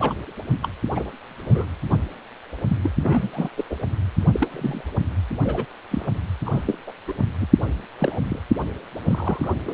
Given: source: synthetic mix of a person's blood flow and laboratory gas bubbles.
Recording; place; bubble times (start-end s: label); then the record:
Doppler ultrasound of blood flow; precordium
0.00-0.14 s: bubbles
0.62-0.68 s: bubbles
0.95-1.11 s: bubbles
1.46-1.67 s: bubbles
1.89-1.97 s: bubbles
2.67-2.78 s: bubbles
2.83-2.91 s: bubbles
3.00-3.29 s: bubbles
3.33-3.49 s: bubbles
3.57-3.64 s: bubbles
3.70-3.75 s: bubbles
4.33-4.50 s: bubbles
4.53-4.81 s: bubbles
5.44-5.65 s: bubbles
5.91-6.13 s: bubbles
6.46-6.50 s: bubbles
6.53-6.63 s: bubbles
6.67-6.78 s: bubbles
6.87-6.92 s: bubbles
7.08-7.13 s: bubbles
7.41-7.47 s: bubbles
7.98-8.20 s: bubbles
8.26-8.39 s: bubbles
9.04-9.52 s: bubbles
9.65-9.74 s: bubbles
From the record:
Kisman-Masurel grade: 242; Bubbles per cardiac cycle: several, 3 to 8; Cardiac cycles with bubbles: 100%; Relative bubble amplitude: moderate (0.250 to 0.450); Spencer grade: 3 (all of the cardiac periods contain showers or single bubble signals, but not dominating or overriding the cardiac motion signals); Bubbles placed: anywhere in the cardiac cycle